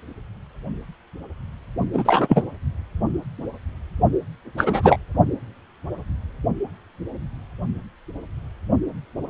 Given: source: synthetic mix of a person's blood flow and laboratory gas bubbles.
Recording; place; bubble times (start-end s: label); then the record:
Doppler ultrasound of blood flow; precordium
1.93-2.43 s: bubbles
4.57-4.99 s: bubbles
From the record:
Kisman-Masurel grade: 223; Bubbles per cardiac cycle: several, 3 to 8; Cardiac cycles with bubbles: 10 to 50%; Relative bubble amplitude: loud (0.450 to 0.775); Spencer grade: 2 (many but less than half of the cardiac periods contain bubble signals, singularly or in groups); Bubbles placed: only in the low amplitude regions of the cardiac cycle